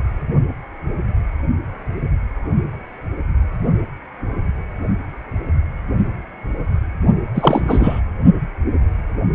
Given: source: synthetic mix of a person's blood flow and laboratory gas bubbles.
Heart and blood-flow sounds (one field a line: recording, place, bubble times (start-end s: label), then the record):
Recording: Doppler ultrasound of blood flow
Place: precordium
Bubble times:
7.34-8.00 s: bubbles
From the record:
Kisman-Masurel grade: 213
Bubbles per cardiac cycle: several, 3 to 8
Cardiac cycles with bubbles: 1 to 10%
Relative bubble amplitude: loud (0.450 to 0.775)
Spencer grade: 1 (occasional bubble signal discernible with the cardiac motion signal, with majority of cardiac periods free of bubbles)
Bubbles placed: only in the low amplitude regions of the cardiac cycle